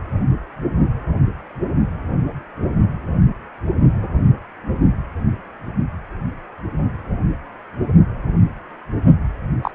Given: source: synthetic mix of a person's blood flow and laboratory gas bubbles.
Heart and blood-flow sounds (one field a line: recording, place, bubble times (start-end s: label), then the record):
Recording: Doppler ultrasound of blood flow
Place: precordium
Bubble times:
9.62-9.71 s: bubbles
From the record:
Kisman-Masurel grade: 112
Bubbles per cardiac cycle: 1 to 2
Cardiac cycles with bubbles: 1 to 10%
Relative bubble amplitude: moderate (0.250 to 0.450)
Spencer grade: 1 (occasional bubble signal discernible with the cardiac motion signal, with majority of cardiac periods free of bubbles)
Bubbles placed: only in the low amplitude regions of the cardiac cycle